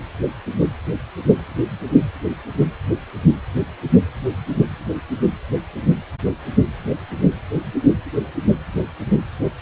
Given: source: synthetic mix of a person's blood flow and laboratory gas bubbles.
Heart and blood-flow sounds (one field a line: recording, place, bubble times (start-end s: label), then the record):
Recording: Doppler ultrasound of blood flow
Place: precordium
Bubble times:
1.27-1.42 s: bubbles
From the record:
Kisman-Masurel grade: 111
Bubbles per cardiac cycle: 1 to 2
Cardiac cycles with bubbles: 1 to 10%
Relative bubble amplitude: barely perceptible (0.100 to 0.250)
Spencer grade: 1 (occasional bubble signal discernible with the cardiac motion signal, with majority of cardiac periods free of bubbles)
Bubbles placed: anywhere in the cardiac cycle